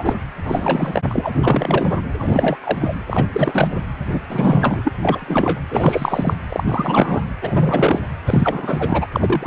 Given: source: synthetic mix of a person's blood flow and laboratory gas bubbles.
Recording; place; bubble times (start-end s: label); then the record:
Doppler ultrasound of blood flow; precordium
0.00-0.15 s: bubbles
0.45-1.02 s: bubbles
1.09-1.30 s: bubbles
1.38-1.98 s: bubbles
2.19-2.56 s: bubbles
2.64-2.94 s: bubbles
3.07-3.26 s: bubbles
3.33-3.67 s: bubbles
4.11-4.21 s: bubbles
4.29-4.92 s: bubbles
5.02-5.61 s: bubbles
5.71-6.33 s: bubbles
6.49-7.21 s: bubbles
7.42-8.00 s: bubbles
8.26-9.07 s: bubbles
9.12-9.47 s: bubbles
From the record:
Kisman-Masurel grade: 343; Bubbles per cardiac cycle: rolling drumbeat, 9 or more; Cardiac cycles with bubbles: 100%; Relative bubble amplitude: loud (0.450 to 0.775); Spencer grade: 3 (all of the cardiac periods contain showers or single bubble signals, but not dominating or overriding the cardiac motion signals); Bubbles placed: anywhere in the cardiac cycle